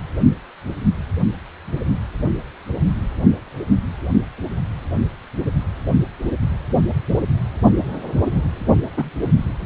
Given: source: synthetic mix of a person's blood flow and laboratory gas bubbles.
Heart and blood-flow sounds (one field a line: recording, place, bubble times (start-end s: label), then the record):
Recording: Doppler ultrasound of blood flow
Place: precordium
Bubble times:
8.97-9.10 s: bubbles
From the record:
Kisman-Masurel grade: 112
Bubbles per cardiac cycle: 1 to 2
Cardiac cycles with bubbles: 1 to 10%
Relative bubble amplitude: moderate (0.250 to 0.450)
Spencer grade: 1 (occasional bubble signal discernible with the cardiac motion signal, with majority of cardiac periods free of bubbles)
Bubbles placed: only in the low amplitude regions of the cardiac cycle